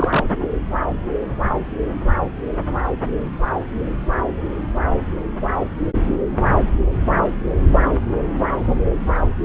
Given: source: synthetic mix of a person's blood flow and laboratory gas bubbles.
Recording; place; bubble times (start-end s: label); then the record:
Doppler ultrasound of blood flow; subclavian vein
0.00-0.26 s: bubbles
From the record:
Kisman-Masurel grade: 112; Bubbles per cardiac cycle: 1 to 2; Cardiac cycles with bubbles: 1 to 10%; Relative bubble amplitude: moderate (0.250 to 0.450); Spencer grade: 1 (occasional bubble signal discernible with the cardiac motion signal, with majority of cardiac periods free of bubbles); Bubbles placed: anywhere in the cardiac cycle